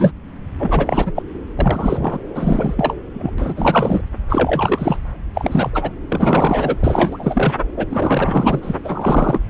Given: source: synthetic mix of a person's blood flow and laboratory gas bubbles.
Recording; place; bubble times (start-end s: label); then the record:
Doppler ultrasound of blood flow; subclavian vein
0.00-0.12 s: bubbles
0.58-1.12 s: bubbles
1.16-1.23 s: bubbles
1.59-2.18 s: bubbles
2.34-2.94 s: bubbles
3.13-3.30 s: bubbles
3.38-4.01 s: bubbles
4.29-4.96 s: bubbles
5.34-5.91 s: bubbles
6.08-6.77 s: bubbles
6.80-7.54 s: bubbles
7.77-7.86 s: bubbles
7.89-8.60 s: bubbles
8.62-8.75 s: bubbles
8.84-9.38 s: bubbles
From the record:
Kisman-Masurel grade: 333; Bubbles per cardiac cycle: rolling drumbeat, 9 or more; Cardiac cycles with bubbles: 50 to 99%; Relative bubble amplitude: loud (0.450 to 0.775); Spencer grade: 3 (all of the cardiac periods contain showers or single bubble signals, but not dominating or overriding the cardiac motion signals); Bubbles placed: anywhere in the cardiac cycle